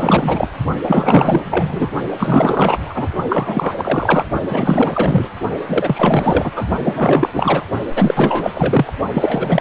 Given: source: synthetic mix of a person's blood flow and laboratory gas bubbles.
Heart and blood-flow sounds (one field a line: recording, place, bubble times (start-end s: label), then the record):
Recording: Doppler ultrasound of blood flow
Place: precordium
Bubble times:
0.00-0.48 s: bubbles
0.83-1.42 s: bubbles
1.45-1.90 s: bubbles
2.17-3.07 s: bubbles
3.29-4.25 s: bubbles
4.41-5.29 s: bubbles
5.68-6.52 s: bubbles
6.55-6.66 s: bubbles
6.83-7.29 s: bubbles
7.33-7.65 s: bubbles
7.95-8.52 s: bubbles
8.54-8.93 s: bubbles
9.13-9.61 s: bubbles
From the record:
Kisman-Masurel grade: 444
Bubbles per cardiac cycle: continuous sound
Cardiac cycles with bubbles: 100%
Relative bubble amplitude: maximal (0.775 to 0.999)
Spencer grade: 4 (maximum detectable bubble signal sounding continuously throughout systole and diastole of every cardiac period, and overriding the amplitude of the normal cardiac signals)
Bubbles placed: only in the low amplitude regions of the cardiac cycle